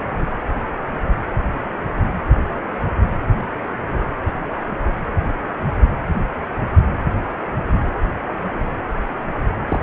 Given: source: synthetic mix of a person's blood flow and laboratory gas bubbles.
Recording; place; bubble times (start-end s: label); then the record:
Doppler ultrasound of blood flow; precordium
9.69-9.79 s: bubbles
From the record:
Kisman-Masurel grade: 212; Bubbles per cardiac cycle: several, 3 to 8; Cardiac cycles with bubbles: 1 to 10%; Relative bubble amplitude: moderate (0.250 to 0.450); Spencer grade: 1 (occasional bubble signal discernible with the cardiac motion signal, with majority of cardiac periods free of bubbles); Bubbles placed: anywhere in the cardiac cycle